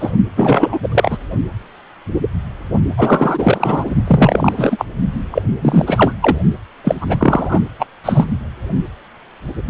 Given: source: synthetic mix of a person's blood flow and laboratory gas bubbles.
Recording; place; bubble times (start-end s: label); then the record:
Doppler ultrasound of blood flow; precordium
0.00-0.11 s: bubbles
0.37-0.78 s: bubbles
0.82-1.18 s: bubbles
2.97-3.85 s: bubbles
4.07-4.54 s: bubbles
4.57-4.85 s: bubbles
5.31-5.42 s: bubbles
5.62-6.13 s: bubbles
6.21-6.37 s: bubbles
6.83-6.95 s: bubbles
7.00-7.60 s: bubbles
7.79-7.86 s: bubbles
8.04-8.30 s: bubbles
From the record:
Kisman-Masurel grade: 333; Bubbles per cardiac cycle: rolling drumbeat, 9 or more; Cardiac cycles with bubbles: 50 to 99%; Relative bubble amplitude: loud (0.450 to 0.775); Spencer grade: 3 (all of the cardiac periods contain showers or single bubble signals, but not dominating or overriding the cardiac motion signals); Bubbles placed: only in the low amplitude regions of the cardiac cycle